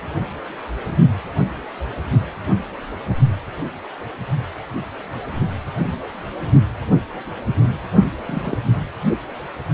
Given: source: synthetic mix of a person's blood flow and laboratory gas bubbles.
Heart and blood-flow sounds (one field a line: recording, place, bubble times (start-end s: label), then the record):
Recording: Doppler ultrasound of blood flow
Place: precordium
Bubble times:
8.27-8.56 s: bubbles
From the record:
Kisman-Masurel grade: 112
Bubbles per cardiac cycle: 1 to 2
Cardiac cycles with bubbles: 1 to 10%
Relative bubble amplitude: moderate (0.250 to 0.450)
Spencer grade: 1 (occasional bubble signal discernible with the cardiac motion signal, with majority of cardiac periods free of bubbles)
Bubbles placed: only in the low amplitude regions of the cardiac cycle